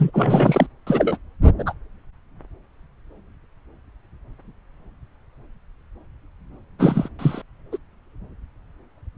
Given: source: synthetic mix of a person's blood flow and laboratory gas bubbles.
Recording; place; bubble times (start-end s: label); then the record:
Doppler ultrasound of blood flow; subclavian vein
0.00-0.67 s: bubbles
0.86-1.17 s: bubbles
1.58-1.64 s: bubbles
1.66-1.73 s: bubbles
6.79-7.09 s: bubbles
7.19-7.42 s: bubbles
7.72-7.77 s: bubbles
From the record:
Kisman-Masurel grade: 223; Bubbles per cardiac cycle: several, 3 to 8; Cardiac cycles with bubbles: 10 to 50%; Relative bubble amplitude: loud (0.450 to 0.775); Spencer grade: 2 (many but less than half of the cardiac periods contain bubble signals, singularly or in groups); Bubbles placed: anywhere in the cardiac cycle